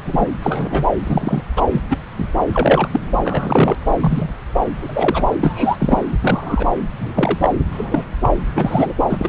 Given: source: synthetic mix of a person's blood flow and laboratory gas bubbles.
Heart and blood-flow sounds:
Doppler ultrasound of blood flow; subclavian vein
0.05-0.26 s: bubbles
0.43-0.87 s: bubbles
1.03-1.44 s: bubbles
1.56-1.61 s: bubbles
1.72-1.81 s: bubbles
1.90-1.97 s: bubbles
2.17-2.25 s: bubbles
2.54-2.88 s: bubbles
2.91-3.00 s: bubbles
3.24-3.76 s: bubbles
4.00-4.30 s: bubbles
4.80-5.23 s: bubbles
5.40-6.02 s: bubbles
6.21-6.67 s: bubbles
6.98-7.38 s: bubbles
7.41-7.50 s: bubbles
7.71-8.05 s: bubbles
8.21-8.29 s: bubbles
8.54-8.94 s: bubbles
9.09-9.29 s: bubbles
From the record:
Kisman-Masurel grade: 243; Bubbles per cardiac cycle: several, 3 to 8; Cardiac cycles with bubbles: 100%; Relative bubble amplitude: loud (0.450 to 0.775); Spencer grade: 3 (all of the cardiac periods contain showers or single bubble signals, but not dominating or overriding the cardiac motion signals); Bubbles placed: anywhere in the cardiac cycle

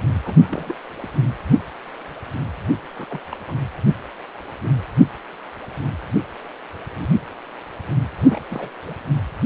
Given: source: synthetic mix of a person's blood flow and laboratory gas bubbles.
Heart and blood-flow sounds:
Doppler ultrasound of blood flow; precordium
0.25-0.46 s: bubbles
0.49-0.75 s: bubbles
1.02-1.07 s: bubbles
2.98-3.19 s: bubbles
3.31-3.36 s: bubbles
3.48-3.53 s: bubbles
8.28-8.39 s: bubbles
8.50-8.70 s: bubbles
8.86-8.94 s: bubbles
From the record:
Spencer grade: 2 (many but less than half of the cardiac periods contain bubble signals, singularly or in groups); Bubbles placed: anywhere in the cardiac cycle

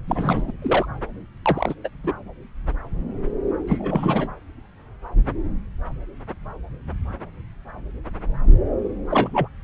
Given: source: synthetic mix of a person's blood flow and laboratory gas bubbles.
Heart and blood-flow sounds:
Doppler ultrasound of blood flow; subclavian vein
0.07-0.52 s: bubbles
0.62-0.86 s: bubbles
1.45-1.74 s: bubbles
1.84-1.89 s: bubbles
2.04-2.12 s: bubbles
3.67-4.29 s: bubbles
9.10-9.48 s: bubbles
From the record:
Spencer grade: 2 (many but less than half of the cardiac periods contain bubble signals, singularly or in groups); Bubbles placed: anywhere in the cardiac cycle

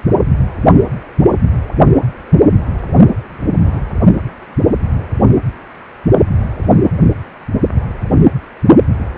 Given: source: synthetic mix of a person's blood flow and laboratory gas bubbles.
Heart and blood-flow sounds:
Doppler ultrasound of blood flow; precordium
3.65-3.80 s: bubbles
From the record:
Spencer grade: 1 (occasional bubble signal discernible with the cardiac motion signal, with majority of cardiac periods free of bubbles); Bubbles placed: only in the low amplitude regions of the cardiac cycle

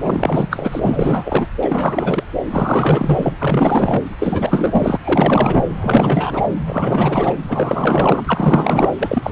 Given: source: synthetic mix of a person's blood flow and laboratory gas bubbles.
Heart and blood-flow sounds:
Doppler ultrasound of blood flow; subclavian vein
0.03-0.79 s: bubbles
0.82-1.48 s: bubbles
1.62-2.24 s: bubbles
2.51-3.33 s: bubbles
3.37-4.05 s: bubbles
4.18-4.97 s: bubbles
5.02-5.65 s: bubbles
5.81-6.48 s: bubbles
6.66-7.35 s: bubbles
7.48-8.90 s: bubbles
8.98-9.32 s: bubbles
From the record:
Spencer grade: 4 (maximum detectable bubble signal sounding continuously throughout systole and diastole of every cardiac period, and overriding the amplitude of the normal cardiac signals); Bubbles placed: anywhere in the cardiac cycle

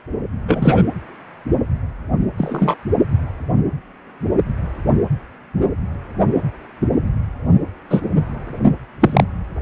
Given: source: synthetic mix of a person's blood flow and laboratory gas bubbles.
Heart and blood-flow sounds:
Doppler ultrasound of blood flow; precordium
0.47-0.82 s: bubbles
2.38-2.76 s: bubbles
7.90-8.01 s: bubbles
9.00-9.24 s: bubbles
From the record:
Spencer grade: 2 (many but less than half of the cardiac periods contain bubble signals, singularly or in groups); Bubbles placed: anywhere in the cardiac cycle

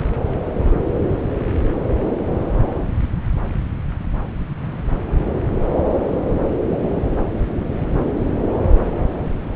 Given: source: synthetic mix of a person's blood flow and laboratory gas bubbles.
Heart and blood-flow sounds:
Doppler ultrasound of blood flow; subclavian vein
0.59-0.81 s: bubbles
1.39-1.45 s: bubbles
From the record:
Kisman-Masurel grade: 111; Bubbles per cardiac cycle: 1 to 2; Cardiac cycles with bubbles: 1 to 10%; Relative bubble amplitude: barely perceptible (0.100 to 0.250); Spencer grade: 1 (occasional bubble signal discernible with the cardiac motion signal, with majority of cardiac periods free of bubbles); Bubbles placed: anywhere in the cardiac cycle

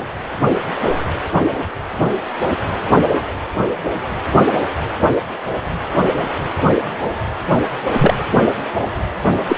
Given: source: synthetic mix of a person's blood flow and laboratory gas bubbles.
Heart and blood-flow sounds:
Doppler ultrasound of blood flow; precordium
8.00-8.14 s: bubbles
9.48-9.56 s: bubbles
From the record:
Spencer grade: 2 (many but less than half of the cardiac periods contain bubble signals, singularly or in groups); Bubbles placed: anywhere in the cardiac cycle

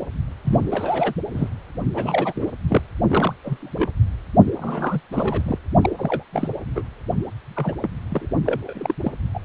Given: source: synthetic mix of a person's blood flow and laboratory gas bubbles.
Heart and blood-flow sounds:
Doppler ultrasound of blood flow; precordium
0.45-1.14 s: bubbles
1.33-1.50 s: bubbles
1.94-2.52 s: bubbles
2.68-2.81 s: bubbles
3.08-3.33 s: bubbles
3.44-3.58 s: bubbles
3.62-3.88 s: bubbles
4.58-5.00 s: bubbles
5.12-5.58 s: bubbles
5.81-5.90 s: bubbles
5.98-6.24 s: bubbles
6.33-6.48 s: bubbles
6.75-6.83 s: bubbles
7.56-7.75 s: bubbles
7.82-7.89 s: bubbles
8.11-8.28 s: bubbles
8.45-8.94 s: bubbles
9.03-9.12 s: bubbles
9.35-9.40 s: bubbles
From the record:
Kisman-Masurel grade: 242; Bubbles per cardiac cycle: several, 3 to 8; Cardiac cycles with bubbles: 100%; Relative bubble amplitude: moderate (0.250 to 0.450); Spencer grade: 3 (all of the cardiac periods contain showers or single bubble signals, but not dominating or overriding the cardiac motion signals); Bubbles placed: anywhere in the cardiac cycle

